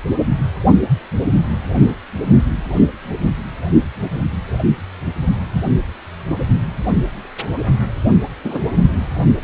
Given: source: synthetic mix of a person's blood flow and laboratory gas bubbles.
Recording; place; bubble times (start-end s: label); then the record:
Doppler ultrasound of blood flow; precordium
8.44-8.59 s: bubbles
8.74-8.93 s: bubbles
From the record:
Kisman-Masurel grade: 113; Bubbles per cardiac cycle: 1 to 2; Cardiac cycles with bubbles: 1 to 10%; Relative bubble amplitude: loud (0.450 to 0.775); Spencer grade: 1 (occasional bubble signal discernible with the cardiac motion signal, with majority of cardiac periods free of bubbles); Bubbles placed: anywhere in the cardiac cycle